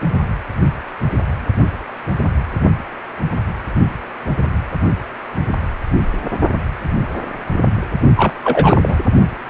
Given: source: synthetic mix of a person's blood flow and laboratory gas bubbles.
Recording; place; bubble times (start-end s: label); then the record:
Doppler ultrasound of blood flow; precordium
8.17-8.32 s: bubbles
8.44-8.97 s: bubbles
From the record:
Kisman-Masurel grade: 213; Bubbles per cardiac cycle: several, 3 to 8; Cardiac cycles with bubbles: 1 to 10%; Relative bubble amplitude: loud (0.450 to 0.775); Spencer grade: 1 (occasional bubble signal discernible with the cardiac motion signal, with majority of cardiac periods free of bubbles); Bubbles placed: only in the low amplitude regions of the cardiac cycle